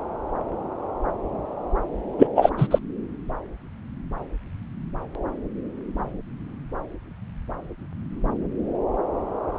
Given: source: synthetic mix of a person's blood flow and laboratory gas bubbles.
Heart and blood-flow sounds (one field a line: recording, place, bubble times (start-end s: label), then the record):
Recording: Doppler ultrasound of blood flow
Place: subclavian vein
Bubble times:
2.18-2.27 s: bubbles
2.35-2.50 s: bubbles
2.58-2.67 s: bubbles
2.71-2.79 s: bubbles
From the record:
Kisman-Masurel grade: 213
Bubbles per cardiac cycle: several, 3 to 8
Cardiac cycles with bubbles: 1 to 10%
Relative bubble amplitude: loud (0.450 to 0.775)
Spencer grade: 1 (occasional bubble signal discernible with the cardiac motion signal, with majority of cardiac periods free of bubbles)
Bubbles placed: anywhere in the cardiac cycle